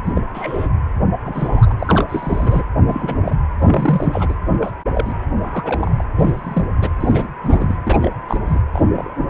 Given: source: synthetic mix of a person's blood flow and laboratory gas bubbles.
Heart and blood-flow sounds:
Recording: Doppler ultrasound of blood flow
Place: precordium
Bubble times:
0.04-0.12 s: bubbles
0.15-0.21 s: bubbles
0.34-0.67 s: bubbles
1.24-1.75 s: bubbles
1.79-2.05 s: bubbles
2.09-2.65 s: bubbles
2.86-3.35 s: bubbles
3.59-4.34 s: bubbles
4.53-4.72 s: bubbles
4.94-5.13 s: bubbles
5.30-6.04 s: bubbles
6.15-6.66 s: bubbles
6.81-6.89 s: bubbles
7.00-7.29 s: bubbles
7.43-7.76 s: bubbles
7.86-8.10 s: bubbles
8.28-8.38 s: bubbles
8.45-8.58 s: bubbles
8.73-8.81 s: bubbles
8.93-9.13 s: bubbles
From the record:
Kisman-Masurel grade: 242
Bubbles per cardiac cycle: several, 3 to 8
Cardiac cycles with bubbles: 100%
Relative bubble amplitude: moderate (0.250 to 0.450)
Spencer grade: 3 (all of the cardiac periods contain showers or single bubble signals, but not dominating or overriding the cardiac motion signals)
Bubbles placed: anywhere in the cardiac cycle

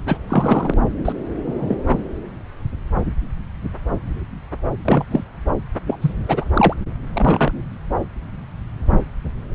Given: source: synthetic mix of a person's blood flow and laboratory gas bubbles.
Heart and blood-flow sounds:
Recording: Doppler ultrasound of blood flow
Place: subclavian vein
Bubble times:
0.06-0.17 s: bubbles
0.28-0.74 s: bubbles
1.04-1.12 s: bubbles
1.46-1.77 s: bubbles
1.86-2.03 s: bubbles
4.85-5.06 s: bubbles
5.11-5.24 s: bubbles
5.86-5.96 s: bubbles
6.02-6.15 s: bubbles
6.28-6.45 s: bubbles
6.53-6.74 s: bubbles
7.12-7.52 s: bubbles
From the record:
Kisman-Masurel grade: 232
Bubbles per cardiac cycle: several, 3 to 8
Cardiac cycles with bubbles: 50 to 99%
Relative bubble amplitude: moderate (0.250 to 0.450)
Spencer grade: 3 (all of the cardiac periods contain showers or single bubble signals, but not dominating or overriding the cardiac motion signals)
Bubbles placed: anywhere in the cardiac cycle

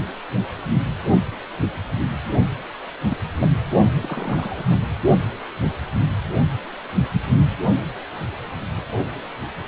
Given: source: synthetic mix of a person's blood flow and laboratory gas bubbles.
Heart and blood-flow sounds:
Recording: Doppler ultrasound of blood flow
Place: precordium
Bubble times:
2.37-2.46 s: bubbles
3.06-3.17 s: bubbles
3.41-3.48 s: bubbles
4.02-4.64 s: bubbles
4.67-4.76 s: bubbles
From the record:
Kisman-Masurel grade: 221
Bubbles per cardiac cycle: several, 3 to 8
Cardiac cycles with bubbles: 10 to 50%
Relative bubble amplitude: barely perceptible (0.100 to 0.250)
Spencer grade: 2 (many but less than half of the cardiac periods contain bubble signals, singularly or in groups)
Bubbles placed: anywhere in the cardiac cycle

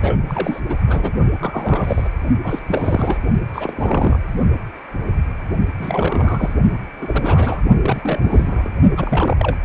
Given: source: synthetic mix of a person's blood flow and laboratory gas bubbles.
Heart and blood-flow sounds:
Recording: Doppler ultrasound of blood flow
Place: precordium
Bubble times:
0.00-0.20 s: bubbles
0.28-0.60 s: bubbles
0.69-0.76 s: bubbles
0.86-1.12 s: bubbles
1.39-2.08 s: bubbles
2.43-2.60 s: bubbles
2.68-3.19 s: bubbles
3.53-4.19 s: bubbles
5.79-6.53 s: bubbles
7.01-7.61 s: bubbles
7.77-8.70 s: bubbles
8.97-9.36 s: bubbles
9.38-9.57 s: bubbles
From the record:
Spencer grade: 3 (all of the cardiac periods contain showers or single bubble signals, but not dominating or overriding the cardiac motion signals)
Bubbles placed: only in the low amplitude regions of the cardiac cycle

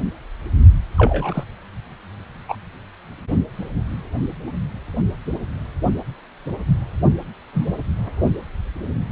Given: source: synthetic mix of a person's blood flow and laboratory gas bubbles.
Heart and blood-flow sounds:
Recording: Doppler ultrasound of blood flow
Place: precordium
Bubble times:
0.98-1.44 s: bubbles
2.48-2.56 s: bubbles
7.53-7.68 s: bubbles
From the record:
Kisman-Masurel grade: 122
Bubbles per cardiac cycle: 1 to 2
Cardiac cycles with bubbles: 10 to 50%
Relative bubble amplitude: moderate (0.250 to 0.450)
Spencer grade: 2 (many but less than half of the cardiac periods contain bubble signals, singularly or in groups)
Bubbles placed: only in the low amplitude regions of the cardiac cycle

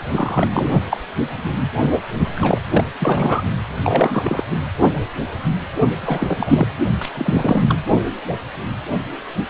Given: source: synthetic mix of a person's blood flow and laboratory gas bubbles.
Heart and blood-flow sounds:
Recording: Doppler ultrasound of blood flow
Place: precordium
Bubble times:
0.11-0.48 s: bubbles
0.52-0.81 s: bubbles
0.91-1.01 s: bubbles
2.36-2.59 s: bubbles
2.70-2.84 s: bubbles
2.99-3.43 s: bubbles
3.78-4.44 s: bubbles
6.00-6.67 s: bubbles
7.01-7.09 s: bubbles
7.15-7.62 s: bubbles
7.69-7.78 s: bubbles
From the record:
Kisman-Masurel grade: 332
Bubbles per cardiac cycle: rolling drumbeat, 9 or more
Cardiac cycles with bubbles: 50 to 99%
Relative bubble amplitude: moderate (0.250 to 0.450)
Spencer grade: 3 (all of the cardiac periods contain showers or single bubble signals, but not dominating or overriding the cardiac motion signals)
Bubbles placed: only in the low amplitude regions of the cardiac cycle

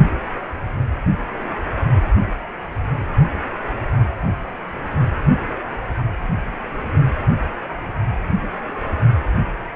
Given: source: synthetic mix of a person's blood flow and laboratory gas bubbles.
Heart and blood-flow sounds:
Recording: Doppler ultrasound of blood flow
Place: precordium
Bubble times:
no bubbles
From the record:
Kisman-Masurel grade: 000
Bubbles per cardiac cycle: 0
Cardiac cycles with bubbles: 0%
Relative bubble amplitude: no bubbles discernible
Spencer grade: 0 (complete lack of bubble signals)

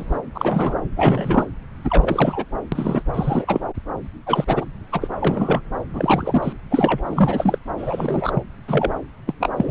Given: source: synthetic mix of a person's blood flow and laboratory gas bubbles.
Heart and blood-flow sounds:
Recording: Doppler ultrasound of blood flow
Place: subclavian vein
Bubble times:
0.00-0.19 s: bubbles
0.34-0.75 s: bubbles
0.96-1.46 s: bubbles
1.84-2.44 s: bubbles
2.72-3.03 s: bubbles
3.13-3.61 s: bubbles
4.26-4.65 s: bubbles
4.92-5.08 s: bubbles
5.21-5.61 s: bubbles
5.94-6.53 s: bubbles
6.70-7.03 s: bubbles
7.06-7.58 s: bubbles
7.78-8.43 s: bubbles
8.67-8.90 s: bubbles
9.26-9.34 s: bubbles
9.40-9.52 s: bubbles
9.56-9.71 s: bubbles
From the record:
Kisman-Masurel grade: 233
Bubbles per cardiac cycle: several, 3 to 8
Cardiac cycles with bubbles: 50 to 99%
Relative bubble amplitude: loud (0.450 to 0.775)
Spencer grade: 3 (all of the cardiac periods contain showers or single bubble signals, but not dominating or overriding the cardiac motion signals)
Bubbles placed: anywhere in the cardiac cycle

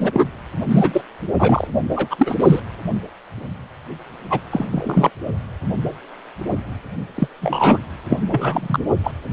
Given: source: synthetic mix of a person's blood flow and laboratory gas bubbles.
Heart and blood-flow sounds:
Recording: Doppler ultrasound of blood flow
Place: precordium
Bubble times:
0.00-0.27 s: bubbles
0.70-1.01 s: bubbles
1.39-1.68 s: bubbles
1.89-2.08 s: bubbles
2.10-2.36 s: bubbles
2.40-2.60 s: bubbles
4.29-4.40 s: bubbles
4.50-4.67 s: bubbles
4.71-5.10 s: bubbles
7.15-7.28 s: bubbles
7.41-7.78 s: bubbles
8.09-8.19 s: bubbles
8.29-8.79 s: bubbles
9.03-9.12 s: bubbles
From the record:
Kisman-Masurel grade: 233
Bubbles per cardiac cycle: several, 3 to 8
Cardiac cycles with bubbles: 50 to 99%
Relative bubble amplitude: loud (0.450 to 0.775)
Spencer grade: 3 (all of the cardiac periods contain showers or single bubble signals, but not dominating or overriding the cardiac motion signals)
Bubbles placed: anywhere in the cardiac cycle

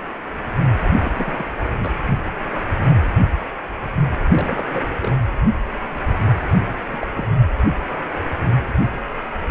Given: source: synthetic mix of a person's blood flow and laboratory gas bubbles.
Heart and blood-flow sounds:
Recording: Doppler ultrasound of blood flow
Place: precordium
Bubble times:
1.01-1.11 s: bubbles
1.18-1.45 s: bubbles
1.64-1.70 s: bubbles
1.79-1.93 s: bubbles
4.29-4.67 s: bubbles
4.70-4.82 s: bubbles
5.01-5.19 s: bubbles
6.92-7.07 s: bubbles
7.13-7.33 s: bubbles
From the record:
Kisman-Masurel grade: 221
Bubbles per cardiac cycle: several, 3 to 8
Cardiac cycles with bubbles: 10 to 50%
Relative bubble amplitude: barely perceptible (0.100 to 0.250)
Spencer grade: 2 (many but less than half of the cardiac periods contain bubble signals, singularly or in groups)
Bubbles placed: anywhere in the cardiac cycle

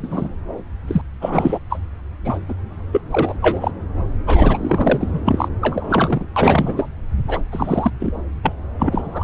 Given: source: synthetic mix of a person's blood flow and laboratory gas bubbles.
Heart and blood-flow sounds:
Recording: Doppler ultrasound of blood flow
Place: subclavian vein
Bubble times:
0.02-0.29 s: bubbles
0.87-1.02 s: bubbles
1.21-1.58 s: bubbles
1.69-1.79 s: bubbles
2.24-2.38 s: bubbles
2.48-2.54 s: bubbles
2.92-3.01 s: bubbles
3.11-3.37 s: bubbles
3.42-3.71 s: bubbles
4.27-5.21 s: bubbles
5.25-5.49 s: bubbles
5.61-6.25 s: bubbles
6.36-6.88 s: bubbles
7.28-7.41 s: bubbles
7.52-7.91 s: bubbles
7.99-8.13 s: bubbles
8.43-8.52 s: bubbles
8.79-9.24 s: bubbles
From the record:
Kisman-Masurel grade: 343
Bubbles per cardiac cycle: rolling drumbeat, 9 or more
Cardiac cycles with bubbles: 100%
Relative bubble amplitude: loud (0.450 to 0.775)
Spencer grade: 3 (all of the cardiac periods contain showers or single bubble signals, but not dominating or overriding the cardiac motion signals)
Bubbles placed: anywhere in the cardiac cycle

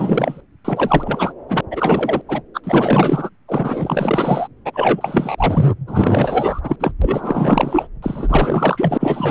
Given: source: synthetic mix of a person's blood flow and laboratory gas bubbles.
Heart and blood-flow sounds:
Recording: Doppler ultrasound of blood flow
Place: subclavian vein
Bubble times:
0.00-0.42 s: bubbles
0.65-1.33 s: bubbles
1.48-1.61 s: bubbles
1.70-2.22 s: bubbles
2.28-2.42 s: bubbles
2.54-2.61 s: bubbles
2.64-3.30 s: bubbles
3.48-4.48 s: bubbles
4.65-5.74 s: bubbles
5.87-6.76 s: bubbles
6.79-6.92 s: bubbles
7.02-7.87 s: bubbles
8.02-9.31 s: bubbles
From the record:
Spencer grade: 4 (maximum detectable bubble signal sounding continuously throughout systole and diastole of every cardiac period, and overriding the amplitude of the normal cardiac signals)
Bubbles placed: anywhere in the cardiac cycle

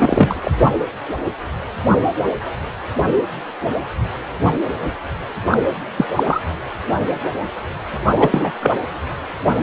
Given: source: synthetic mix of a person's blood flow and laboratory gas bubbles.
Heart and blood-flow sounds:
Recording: Doppler ultrasound of blood flow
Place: precordium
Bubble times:
0.00-0.50 s: bubbles
5.50-5.59 s: bubbles
5.97-6.05 s: bubbles
6.15-6.40 s: bubbles
8.16-8.52 s: bubbles
8.60-8.79 s: bubbles
From the record:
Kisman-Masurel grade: 223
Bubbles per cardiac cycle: several, 3 to 8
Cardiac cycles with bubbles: 10 to 50%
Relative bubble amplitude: loud (0.450 to 0.775)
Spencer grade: 2 (many but less than half of the cardiac periods contain bubble signals, singularly or in groups)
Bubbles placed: anywhere in the cardiac cycle

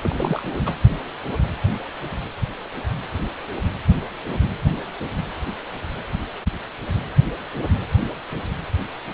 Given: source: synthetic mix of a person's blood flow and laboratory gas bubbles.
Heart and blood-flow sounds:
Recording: Doppler ultrasound of blood flow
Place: precordium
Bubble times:
0.04-0.60 s: bubbles
0.65-0.73 s: bubbles
From the record:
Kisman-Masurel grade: 211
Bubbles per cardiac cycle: several, 3 to 8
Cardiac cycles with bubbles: 1 to 10%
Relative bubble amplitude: barely perceptible (0.100 to 0.250)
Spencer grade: 1 (occasional bubble signal discernible with the cardiac motion signal, with majority of cardiac periods free of bubbles)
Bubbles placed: anywhere in the cardiac cycle

